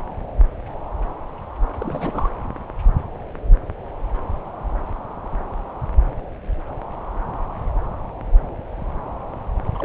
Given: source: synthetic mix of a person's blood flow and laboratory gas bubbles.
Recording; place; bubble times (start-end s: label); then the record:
Doppler ultrasound of blood flow; subclavian vein
1.79-2.29 s: bubbles
9.75-9.84 s: bubbles
From the record:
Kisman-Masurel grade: 221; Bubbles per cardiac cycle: several, 3 to 8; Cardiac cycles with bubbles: 10 to 50%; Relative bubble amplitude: barely perceptible (0.100 to 0.250); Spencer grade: 2 (many but less than half of the cardiac periods contain bubble signals, singularly or in groups); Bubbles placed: anywhere in the cardiac cycle